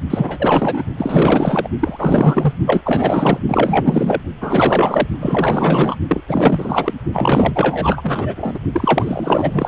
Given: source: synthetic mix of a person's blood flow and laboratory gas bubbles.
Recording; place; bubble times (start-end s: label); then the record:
Doppler ultrasound of blood flow; precordium
0.10-0.83 s: bubbles
0.97-1.68 s: bubbles
1.79-2.54 s: bubbles
2.66-2.82 s: bubbles
2.85-3.39 s: bubbles
3.48-4.21 s: bubbles
4.41-5.07 s: bubbles
5.20-5.96 s: bubbles
6.08-6.21 s: bubbles
6.28-6.94 s: bubbles
7.12-8.59 s: bubbles
8.73-9.68 s: bubbles
From the record:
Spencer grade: 4 (maximum detectable bubble signal sounding continuously throughout systole and diastole of every cardiac period, and overriding the amplitude of the normal cardiac signals); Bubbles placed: only in the low amplitude regions of the cardiac cycle